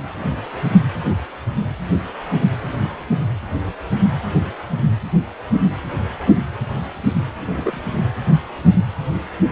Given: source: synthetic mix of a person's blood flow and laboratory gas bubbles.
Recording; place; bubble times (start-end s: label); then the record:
Doppler ultrasound of blood flow; precordium
7.53-7.81 s: bubbles
From the record:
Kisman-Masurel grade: 122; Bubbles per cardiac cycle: 1 to 2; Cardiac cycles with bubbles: 10 to 50%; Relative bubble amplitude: moderate (0.250 to 0.450); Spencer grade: 2 (many but less than half of the cardiac periods contain bubble signals, singularly or in groups); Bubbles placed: anywhere in the cardiac cycle